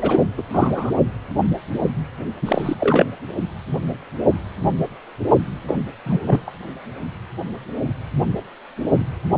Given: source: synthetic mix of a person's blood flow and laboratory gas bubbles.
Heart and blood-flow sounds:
Doppler ultrasound of blood flow; precordium
0.02-0.23 s: bubbles
0.37-0.43 s: bubbles
0.52-0.92 s: bubbles
2.42-2.75 s: bubbles
2.79-3.06 s: bubbles
5.67-5.75 s: bubbles
6.06-6.18 s: bubbles
6.26-6.41 s: bubbles
6.47-6.52 s: bubbles
From the record:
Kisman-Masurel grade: 223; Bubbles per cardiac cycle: several, 3 to 8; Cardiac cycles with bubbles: 10 to 50%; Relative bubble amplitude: loud (0.450 to 0.775); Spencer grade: 2 (many but less than half of the cardiac periods contain bubble signals, singularly or in groups); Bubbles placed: only in the low amplitude regions of the cardiac cycle

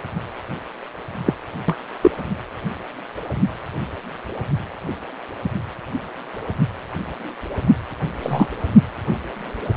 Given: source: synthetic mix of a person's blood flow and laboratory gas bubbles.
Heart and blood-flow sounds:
Doppler ultrasound of blood flow; precordium
1.25-1.33 s: bubbles
1.68-1.77 s: bubbles
2.02-2.11 s: bubbles
8.23-8.46 s: bubbles
From the record:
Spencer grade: 2 (many but less than half of the cardiac periods contain bubble signals, singularly or in groups); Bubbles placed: anywhere in the cardiac cycle

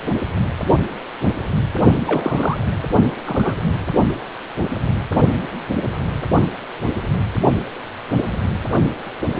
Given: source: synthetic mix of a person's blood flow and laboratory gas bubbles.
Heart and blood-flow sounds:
Doppler ultrasound of blood flow; precordium
2.06-2.58 s: bubbles
3.25-3.63 s: bubbles
From the record:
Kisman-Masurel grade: 212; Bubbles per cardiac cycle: several, 3 to 8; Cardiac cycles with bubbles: 1 to 10%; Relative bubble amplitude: moderate (0.250 to 0.450); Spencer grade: 1 (occasional bubble signal discernible with the cardiac motion signal, with majority of cardiac periods free of bubbles); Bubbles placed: only in the low amplitude regions of the cardiac cycle

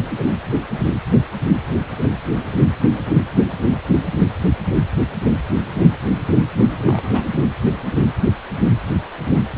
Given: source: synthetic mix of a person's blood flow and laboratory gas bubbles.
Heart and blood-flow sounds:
Doppler ultrasound of blood flow; precordium
6.85-7.21 s: bubbles
From the record:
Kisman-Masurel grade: 211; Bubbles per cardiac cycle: several, 3 to 8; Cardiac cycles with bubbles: 1 to 10%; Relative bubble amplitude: barely perceptible (0.100 to 0.250); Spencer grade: 1 (occasional bubble signal discernible with the cardiac motion signal, with majority of cardiac periods free of bubbles); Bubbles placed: anywhere in the cardiac cycle

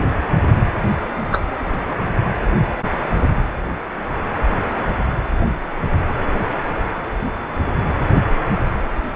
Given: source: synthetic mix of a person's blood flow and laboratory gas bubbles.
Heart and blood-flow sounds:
Doppler ultrasound of blood flow; precordium
1.31-1.42 s: bubbles
From the record:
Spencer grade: 1 (occasional bubble signal discernible with the cardiac motion signal, with majority of cardiac periods free of bubbles); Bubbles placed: anywhere in the cardiac cycle

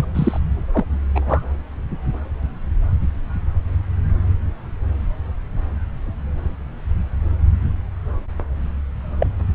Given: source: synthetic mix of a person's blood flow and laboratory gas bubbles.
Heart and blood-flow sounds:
Doppler ultrasound of blood flow; subclavian vein
0.00-0.05 s: bubbles
0.14-0.39 s: bubbles
0.72-0.85 s: bubbles
1.15-1.44 s: bubbles
9.20-9.27 s: bubbles
From the record:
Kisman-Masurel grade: 223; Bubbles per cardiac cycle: several, 3 to 8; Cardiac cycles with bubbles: 10 to 50%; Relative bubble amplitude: loud (0.450 to 0.775); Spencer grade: 2 (many but less than half of the cardiac periods contain bubble signals, singularly or in groups); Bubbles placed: anywhere in the cardiac cycle

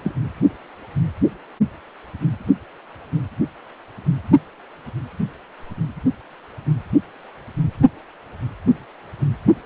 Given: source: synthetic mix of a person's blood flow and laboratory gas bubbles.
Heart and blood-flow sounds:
Doppler ultrasound of blood flow; precordium
0.04-0.14 s: bubbles
From the record:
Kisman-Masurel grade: 112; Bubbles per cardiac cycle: 1 to 2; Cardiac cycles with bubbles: 1 to 10%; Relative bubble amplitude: moderate (0.250 to 0.450); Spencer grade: 1 (occasional bubble signal discernible with the cardiac motion signal, with majority of cardiac periods free of bubbles); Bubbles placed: only in the low amplitude regions of the cardiac cycle

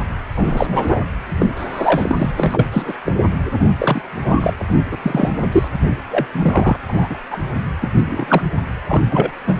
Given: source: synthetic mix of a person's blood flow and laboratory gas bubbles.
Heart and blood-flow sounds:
Doppler ultrasound of blood flow; precordium
0.36-1.05 s: bubbles
1.39-1.51 s: bubbles
1.55-2.30 s: bubbles
2.38-2.67 s: bubbles
2.72-2.93 s: bubbles
3.05-3.12 s: bubbles
3.79-4.01 s: bubbles
4.22-4.54 s: bubbles
4.59-4.62 s: bubbles
4.91-4.97 s: bubbles
5.02-5.29 s: bubbles
5.52-5.68 s: bubbles
6.10-6.26 s: bubbles
6.33-6.78 s: bubbles
6.88-7.17 s: bubbles
7.30-7.38 s: bubbles
7.81-7.89 s: bubbles
8.05-8.42 s: bubbles
8.88-9.03 s: bubbles
9.10-9.32 s: bubbles
9.47-9.57 s: bubbles
From the record:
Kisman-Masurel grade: 243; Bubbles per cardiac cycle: several, 3 to 8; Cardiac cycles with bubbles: 100%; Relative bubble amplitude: loud (0.450 to 0.775); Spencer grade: 3 (all of the cardiac periods contain showers or single bubble signals, but not dominating or overriding the cardiac motion signals); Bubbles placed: anywhere in the cardiac cycle

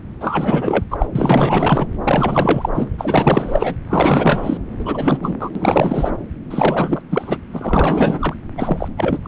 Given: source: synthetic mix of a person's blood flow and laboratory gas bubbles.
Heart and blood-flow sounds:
Doppler ultrasound of blood flow; subclavian vein
0.20-0.84 s: bubbles
0.91-1.06 s: bubbles
1.11-1.87 s: bubbles
2.04-2.69 s: bubbles
2.75-2.95 s: bubbles
2.98-3.74 s: bubbles
3.88-4.58 s: bubbles
4.79-5.18 s: bubbles
5.22-5.37 s: bubbles
5.39-5.50 s: bubbles
5.55-6.11 s: bubbles
6.50-7.01 s: bubbles
7.11-7.38 s: bubbles
7.51-8.34 s: bubbles
8.57-8.88 s: bubbles
8.97-9.18 s: bubbles
9.23-9.28 s: bubbles
From the record:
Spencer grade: 4 (maximum detectable bubble signal sounding continuously throughout systole and diastole of every cardiac period, and overriding the amplitude of the normal cardiac signals); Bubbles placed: anywhere in the cardiac cycle

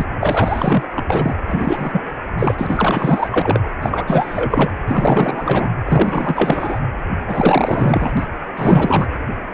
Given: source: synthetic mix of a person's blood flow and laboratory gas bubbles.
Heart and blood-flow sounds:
Doppler ultrasound of blood flow; precordium
0.00-0.04 s: bubbles
0.20-0.83 s: bubbles
0.91-1.04 s: bubbles
1.08-1.38 s: bubbles
1.46-2.00 s: bubbles
2.36-2.55 s: bubbles
2.57-3.61 s: bubbles
3.82-4.71 s: bubbles
4.87-5.73 s: bubbles
5.86-6.79 s: bubbles
7.26-8.12 s: bubbles
8.17-8.26 s: bubbles
8.54-9.07 s: bubbles
From the record:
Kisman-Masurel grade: 444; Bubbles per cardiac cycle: continuous sound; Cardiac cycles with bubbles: 100%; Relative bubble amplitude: maximal (0.775 to 0.999); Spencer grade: 4 (maximum detectable bubble signal sounding continuously throughout systole and diastole of every cardiac period, and overriding the amplitude of the normal cardiac signals); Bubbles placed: anywhere in the cardiac cycle

